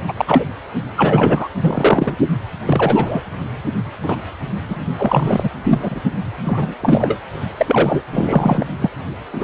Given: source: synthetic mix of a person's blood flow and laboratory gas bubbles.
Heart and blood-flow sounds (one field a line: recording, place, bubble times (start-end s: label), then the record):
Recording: Doppler ultrasound of blood flow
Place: precordium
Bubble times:
0.08-0.13 s: bubbles
0.17-0.46 s: bubbles
0.84-0.86 s: bubbles
0.96-1.48 s: bubbles
1.60-2.16 s: bubbles
2.65-3.23 s: bubbles
4.02-4.17 s: bubbles
4.68-4.76 s: bubbles
4.99-5.49 s: bubbles
5.64-6.00 s: bubbles
6.45-6.74 s: bubbles
6.82-7.17 s: bubbles
7.57-8.02 s: bubbles
8.12-8.66 s: bubbles
8.81-8.89 s: bubbles
9.33-9.44 s: bubbles
From the record:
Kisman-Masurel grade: 233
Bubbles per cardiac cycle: several, 3 to 8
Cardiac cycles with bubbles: 50 to 99%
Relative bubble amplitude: loud (0.450 to 0.775)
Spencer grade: 3 (all of the cardiac periods contain showers or single bubble signals, but not dominating or overriding the cardiac motion signals)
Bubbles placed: anywhere in the cardiac cycle